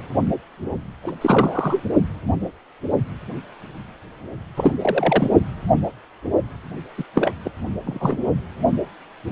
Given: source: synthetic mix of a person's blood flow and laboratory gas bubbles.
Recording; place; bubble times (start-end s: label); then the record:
Doppler ultrasound of blood flow; precordium
1.03-1.15 s: bubbles
1.21-1.83 s: bubbles
4.57-4.76 s: bubbles
4.82-5.30 s: bubbles
6.97-7.04 s: bubbles
7.15-7.31 s: bubbles
7.45-7.50 s: bubbles
7.85-8.17 s: bubbles
From the record:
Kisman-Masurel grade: 222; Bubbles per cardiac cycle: several, 3 to 8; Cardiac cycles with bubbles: 10 to 50%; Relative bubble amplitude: moderate (0.250 to 0.450); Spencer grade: 2 (many but less than half of the cardiac periods contain bubble signals, singularly or in groups); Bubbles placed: only in the low amplitude regions of the cardiac cycle